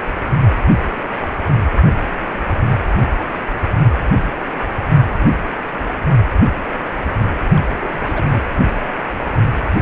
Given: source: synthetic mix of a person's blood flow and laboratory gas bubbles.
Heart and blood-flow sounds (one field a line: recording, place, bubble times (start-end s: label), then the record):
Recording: Doppler ultrasound of blood flow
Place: precordium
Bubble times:
7.57-7.60 s: bubbles
7.81-8.42 s: bubbles
From the record:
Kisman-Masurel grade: 221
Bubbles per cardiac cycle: several, 3 to 8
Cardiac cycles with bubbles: 10 to 50%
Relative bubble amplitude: barely perceptible (0.100 to 0.250)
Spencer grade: 2 (many but less than half of the cardiac periods contain bubble signals, singularly or in groups)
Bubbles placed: anywhere in the cardiac cycle